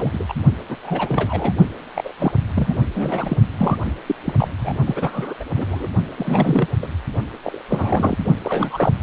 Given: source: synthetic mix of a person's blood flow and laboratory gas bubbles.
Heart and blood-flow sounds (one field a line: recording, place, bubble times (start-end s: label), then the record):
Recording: Doppler ultrasound of blood flow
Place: precordium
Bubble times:
0.00-0.24 s: bubbles
0.28-0.33 s: bubbles
0.69-0.78 s: bubbles
0.84-1.52 s: bubbles
1.95-2.11 s: bubbles
2.19-2.32 s: bubbles
2.55-2.88 s: bubbles
2.94-3.37 s: bubbles
3.58-3.77 s: bubbles
4.06-4.16 s: bubbles
4.25-4.33 s: bubbles
4.39-4.48 s: bubbles
4.60-4.73 s: bubbles
4.87-5.34 s: bubbles
5.40-5.44 s: bubbles
5.56-5.88 s: bubbles
6.18-6.68 s: bubbles
6.82-6.87 s: bubbles
7.44-7.62 s: bubbles
7.70-8.17 s: bubbles
8.24-8.32 s: bubbles
8.44-8.92 s: bubbles
From the record:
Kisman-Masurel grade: 342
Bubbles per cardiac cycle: rolling drumbeat, 9 or more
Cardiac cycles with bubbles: 100%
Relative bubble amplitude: moderate (0.250 to 0.450)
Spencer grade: 3 (all of the cardiac periods contain showers or single bubble signals, but not dominating or overriding the cardiac motion signals)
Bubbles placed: only in the low amplitude regions of the cardiac cycle